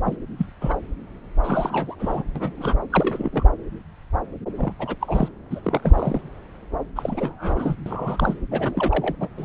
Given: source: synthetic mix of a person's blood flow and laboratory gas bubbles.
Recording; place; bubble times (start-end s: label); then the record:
Doppler ultrasound of blood flow; subclavian vein
0.05-0.16 s: bubbles
0.38-0.46 s: bubbles
0.61-0.76 s: bubbles
1.43-1.95 s: bubbles
2.00-2.23 s: bubbles
2.35-2.75 s: bubbles
2.90-3.46 s: bubbles
4.58-4.72 s: bubbles
4.79-4.95 s: bubbles
5.00-5.29 s: bubbles
5.50-5.80 s: bubbles
5.83-6.21 s: bubbles
6.96-7.75 s: bubbles
7.86-8.36 s: bubbles
8.51-9.15 s: bubbles
9.20-9.29 s: bubbles
9.37-9.45 s: bubbles
From the record:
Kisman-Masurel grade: 232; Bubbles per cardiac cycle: several, 3 to 8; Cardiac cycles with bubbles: 50 to 99%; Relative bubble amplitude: moderate (0.250 to 0.450); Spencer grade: 3 (all of the cardiac periods contain showers or single bubble signals, but not dominating or overriding the cardiac motion signals); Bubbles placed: anywhere in the cardiac cycle